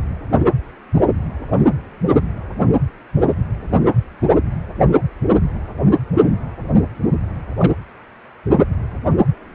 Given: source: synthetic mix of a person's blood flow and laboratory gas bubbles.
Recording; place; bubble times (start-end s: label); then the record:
Doppler ultrasound of blood flow; precordium
7.58-7.73 s: bubbles
From the record:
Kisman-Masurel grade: 112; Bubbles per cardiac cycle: 1 to 2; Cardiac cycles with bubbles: 1 to 10%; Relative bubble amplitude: moderate (0.250 to 0.450); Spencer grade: 1 (occasional bubble signal discernible with the cardiac motion signal, with majority of cardiac periods free of bubbles); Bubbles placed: anywhere in the cardiac cycle